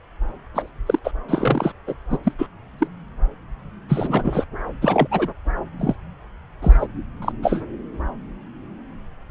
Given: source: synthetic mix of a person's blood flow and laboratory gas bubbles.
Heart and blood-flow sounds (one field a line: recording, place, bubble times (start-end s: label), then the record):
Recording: Doppler ultrasound of blood flow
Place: subclavian vein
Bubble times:
0.54-0.69 s: bubbles
0.86-0.99 s: bubbles
1.04-1.11 s: bubbles
1.28-1.72 s: bubbles
1.87-1.94 s: bubbles
2.10-2.18 s: bubbles
2.23-2.32 s: bubbles
2.38-2.47 s: bubbles
2.79-2.88 s: bubbles
3.89-4.46 s: bubbles
4.81-5.07 s: bubbles
5.11-5.28 s: bubbles
5.79-5.96 s: bubbles
6.62-6.87 s: bubbles
7.22-7.32 s: bubbles
7.42-7.61 s: bubbles
From the record:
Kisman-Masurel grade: 232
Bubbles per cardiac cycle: several, 3 to 8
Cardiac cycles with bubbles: 50 to 99%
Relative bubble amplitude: moderate (0.250 to 0.450)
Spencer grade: 3 (all of the cardiac periods contain showers or single bubble signals, but not dominating or overriding the cardiac motion signals)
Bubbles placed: anywhere in the cardiac cycle